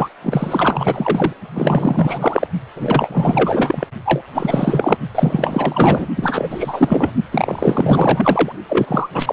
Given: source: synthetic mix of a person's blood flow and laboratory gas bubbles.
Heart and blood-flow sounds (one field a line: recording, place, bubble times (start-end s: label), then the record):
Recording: Doppler ultrasound of blood flow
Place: precordium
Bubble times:
0.00-0.10 s: bubbles
0.23-1.33 s: bubbles
1.54-2.47 s: bubbles
2.75-3.87 s: bubbles
4.05-4.23 s: bubbles
4.33-4.97 s: bubbles
5.15-6.07 s: bubbles
6.17-7.11 s: bubbles
7.31-8.52 s: bubbles
8.69-9.08 s: bubbles
9.12-9.33 s: bubbles
From the record:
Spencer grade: 4 (maximum detectable bubble signal sounding continuously throughout systole and diastole of every cardiac period, and overriding the amplitude of the normal cardiac signals)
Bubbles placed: only in the low amplitude regions of the cardiac cycle